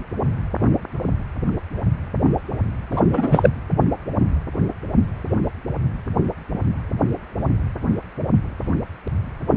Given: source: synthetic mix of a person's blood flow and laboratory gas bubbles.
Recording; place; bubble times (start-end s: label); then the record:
Doppler ultrasound of blood flow; precordium
2.91-3.01 s: bubbles
3.12-3.49 s: bubbles
From the record:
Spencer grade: 1 (occasional bubble signal discernible with the cardiac motion signal, with majority of cardiac periods free of bubbles); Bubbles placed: anywhere in the cardiac cycle